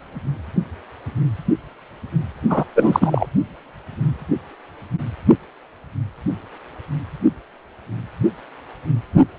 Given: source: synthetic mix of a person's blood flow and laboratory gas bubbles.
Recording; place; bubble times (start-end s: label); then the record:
Doppler ultrasound of blood flow; precordium
2.50-2.64 s: bubbles
2.75-3.27 s: bubbles
From the record:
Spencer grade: 1 (occasional bubble signal discernible with the cardiac motion signal, with majority of cardiac periods free of bubbles); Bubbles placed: only in the low amplitude regions of the cardiac cycle